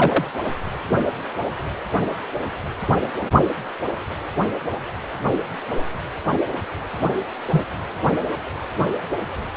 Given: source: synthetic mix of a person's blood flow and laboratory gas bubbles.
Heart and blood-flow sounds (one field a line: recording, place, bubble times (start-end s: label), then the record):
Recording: Doppler ultrasound of blood flow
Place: precordium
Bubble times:
0.00-0.25 s: bubbles
7.50-7.63 s: bubbles
From the record:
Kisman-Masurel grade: 123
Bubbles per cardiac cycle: 1 to 2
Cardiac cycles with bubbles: 10 to 50%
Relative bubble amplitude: loud (0.450 to 0.775)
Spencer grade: 2 (many but less than half of the cardiac periods contain bubble signals, singularly or in groups)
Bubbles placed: anywhere in the cardiac cycle